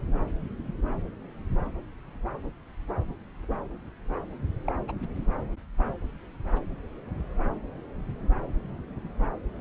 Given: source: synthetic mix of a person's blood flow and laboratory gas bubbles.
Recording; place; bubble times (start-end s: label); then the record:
Doppler ultrasound of blood flow; subclavian vein
4.67-4.72 s: bubbles
4.88-4.92 s: bubbles
From the record:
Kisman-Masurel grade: 111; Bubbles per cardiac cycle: 1 to 2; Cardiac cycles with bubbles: 1 to 10%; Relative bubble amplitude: barely perceptible (0.100 to 0.250); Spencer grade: 1 (occasional bubble signal discernible with the cardiac motion signal, with majority of cardiac periods free of bubbles); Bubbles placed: anywhere in the cardiac cycle